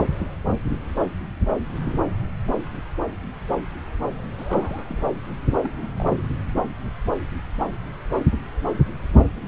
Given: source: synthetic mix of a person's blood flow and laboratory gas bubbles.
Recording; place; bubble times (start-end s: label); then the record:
Doppler ultrasound of blood flow; subclavian vein
4.38-5.00 s: bubbles
5.50-5.71 s: bubbles
5.80-5.87 s: bubbles
5.97-6.29 s: bubbles
From the record:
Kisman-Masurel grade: 221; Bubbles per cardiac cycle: several, 3 to 8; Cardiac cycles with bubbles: 10 to 50%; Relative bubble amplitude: barely perceptible (0.100 to 0.250); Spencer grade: 2 (many but less than half of the cardiac periods contain bubble signals, singularly or in groups); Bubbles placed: anywhere in the cardiac cycle